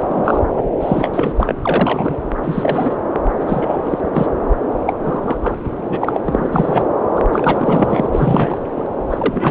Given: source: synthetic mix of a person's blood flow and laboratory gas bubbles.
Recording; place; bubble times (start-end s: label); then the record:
Doppler ultrasound of blood flow; subclavian vein
0.00-0.39 s: bubbles
0.56-0.69 s: bubbles
0.80-1.32 s: bubbles
1.36-1.55 s: bubbles
1.62-2.18 s: bubbles
2.42-2.96 s: bubbles
3.40-3.83 s: bubbles
3.86-3.99 s: bubbles
4.12-4.27 s: bubbles
4.87-4.93 s: bubbles
5.04-5.38 s: bubbles
5.42-5.55 s: bubbles
5.64-5.68 s: bubbles
5.88-6.21 s: bubbles
6.25-6.83 s: bubbles
7.16-7.22 s: bubbles
7.33-8.10 s: bubbles
8.12-8.58 s: bubbles
8.74-8.87 s: bubbles
9.10-9.51 s: bubbles
From the record:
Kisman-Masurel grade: 343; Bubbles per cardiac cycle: rolling drumbeat, 9 or more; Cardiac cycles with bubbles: 100%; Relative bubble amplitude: loud (0.450 to 0.775); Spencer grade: 3 (all of the cardiac periods contain showers or single bubble signals, but not dominating or overriding the cardiac motion signals); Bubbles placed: anywhere in the cardiac cycle